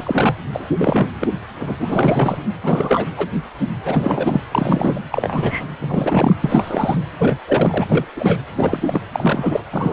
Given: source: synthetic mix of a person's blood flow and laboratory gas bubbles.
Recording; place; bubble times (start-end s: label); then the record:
Doppler ultrasound of blood flow; precordium
0.00-0.34 s: bubbles
0.52-0.70 s: bubbles
0.77-1.15 s: bubbles
1.19-1.27 s: bubbles
1.59-2.38 s: bubbles
2.62-3.06 s: bubbles
3.17-3.29 s: bubbles
3.85-4.44 s: bubbles
4.51-5.00 s: bubbles
5.12-5.66 s: bubbles
5.79-6.36 s: bubbles
6.42-6.99 s: bubbles
7.19-7.38 s: bubbles
7.46-7.85 s: bubbles
7.89-8.05 s: bubbles
8.16-8.43 s: bubbles
8.56-9.01 s: bubbles
9.14-9.62 s: bubbles
9.72-9.93 s: bubbles
From the record:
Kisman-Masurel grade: 333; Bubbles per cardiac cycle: rolling drumbeat, 9 or more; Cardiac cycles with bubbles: 50 to 99%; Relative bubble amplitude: loud (0.450 to 0.775); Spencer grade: 3 (all of the cardiac periods contain showers or single bubble signals, but not dominating or overriding the cardiac motion signals); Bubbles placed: anywhere in the cardiac cycle